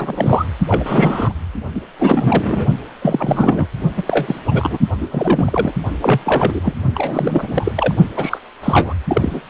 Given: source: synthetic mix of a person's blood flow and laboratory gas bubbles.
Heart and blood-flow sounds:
Doppler ultrasound of blood flow; precordium
0.00-0.46 s: bubbles
0.68-1.33 s: bubbles
1.75-1.81 s: bubbles
1.99-2.66 s: bubbles
3.02-3.66 s: bubbles
3.97-4.03 s: bubbles
4.06-4.40 s: bubbles
4.46-4.79 s: bubbles
5.00-5.08 s: bubbles
5.11-5.72 s: bubbles
6.01-6.20 s: bubbles
6.25-6.61 s: bubbles
6.63-6.73 s: bubbles
6.95-7.73 s: bubbles
7.75-7.95 s: bubbles
8.16-8.39 s: bubbles
8.63-8.94 s: bubbles
9.07-9.41 s: bubbles
From the record:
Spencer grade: 3 (all of the cardiac periods contain showers or single bubble signals, but not dominating or overriding the cardiac motion signals); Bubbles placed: only in the low amplitude regions of the cardiac cycle

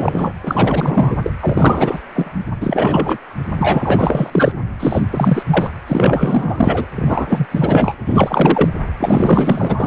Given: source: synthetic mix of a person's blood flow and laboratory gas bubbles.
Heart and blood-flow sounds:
Doppler ultrasound of blood flow; precordium
0.00-0.33 s: bubbles
0.43-1.16 s: bubbles
1.23-1.30 s: bubbles
1.42-1.99 s: bubbles
2.16-2.32 s: bubbles
2.61-3.18 s: bubbles
3.58-4.53 s: bubbles
4.79-5.03 s: bubbles
5.12-5.42 s: bubbles
5.50-5.71 s: bubbles
5.87-6.86 s: bubbles
6.96-7.46 s: bubbles
7.50-7.95 s: bubbles
8.06-8.71 s: bubbles
9.00-9.87 s: bubbles
From the record:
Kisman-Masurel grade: 444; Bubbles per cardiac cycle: continuous sound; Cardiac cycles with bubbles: 100%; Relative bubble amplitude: maximal (0.775 to 0.999); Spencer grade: 4 (maximum detectable bubble signal sounding continuously throughout systole and diastole of every cardiac period, and overriding the amplitude of the normal cardiac signals); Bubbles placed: anywhere in the cardiac cycle

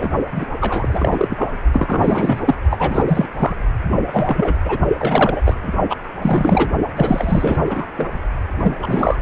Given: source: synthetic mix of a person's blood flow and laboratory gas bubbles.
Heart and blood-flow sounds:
Doppler ultrasound of blood flow; precordium
0.00-0.10 s: bubbles
0.31-0.46 s: bubbles
0.60-1.52 s: bubbles
1.71-2.42 s: bubbles
2.45-2.55 s: bubbles
2.71-3.04 s: bubbles
3.08-3.25 s: bubbles
3.39-3.57 s: bubbles
4.11-4.54 s: bubbles
4.65-4.78 s: bubbles
4.97-5.41 s: bubbles
5.45-5.54 s: bubbles
5.62-5.71 s: bubbles
5.89-5.96 s: bubbles
6.21-6.71 s: bubbles
6.96-7.58 s: bubbles
7.64-7.86 s: bubbles
7.94-8.19 s: bubbles
8.63-8.77 s: bubbles
8.82-9.16 s: bubbles
From the record:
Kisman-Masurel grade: 343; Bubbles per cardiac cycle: rolling drumbeat, 9 or more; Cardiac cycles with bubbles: 100%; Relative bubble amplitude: loud (0.450 to 0.775); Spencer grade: 3 (all of the cardiac periods contain showers or single bubble signals, but not dominating or overriding the cardiac motion signals); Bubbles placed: only in the low amplitude regions of the cardiac cycle

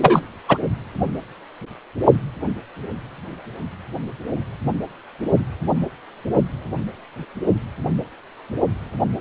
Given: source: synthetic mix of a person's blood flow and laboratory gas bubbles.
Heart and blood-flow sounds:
Doppler ultrasound of blood flow; precordium
0.00-0.21 s: bubbles
0.49-0.58 s: bubbles
From the record:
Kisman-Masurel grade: 223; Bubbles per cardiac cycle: several, 3 to 8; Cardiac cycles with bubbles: 10 to 50%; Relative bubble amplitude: loud (0.450 to 0.775); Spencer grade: 2 (many but less than half of the cardiac periods contain bubble signals, singularly or in groups); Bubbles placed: only in the low amplitude regions of the cardiac cycle

